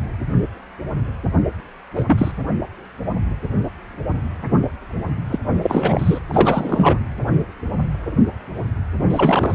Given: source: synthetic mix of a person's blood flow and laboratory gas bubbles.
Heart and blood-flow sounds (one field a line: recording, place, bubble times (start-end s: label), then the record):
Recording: Doppler ultrasound of blood flow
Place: precordium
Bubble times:
1.96-2.32 s: bubbles
5.32-5.39 s: bubbles
5.62-6.19 s: bubbles
6.29-6.99 s: bubbles
9.10-9.55 s: bubbles
From the record:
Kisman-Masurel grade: 223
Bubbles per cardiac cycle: several, 3 to 8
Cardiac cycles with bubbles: 10 to 50%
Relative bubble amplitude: loud (0.450 to 0.775)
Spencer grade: 2 (many but less than half of the cardiac periods contain bubble signals, singularly or in groups)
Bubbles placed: anywhere in the cardiac cycle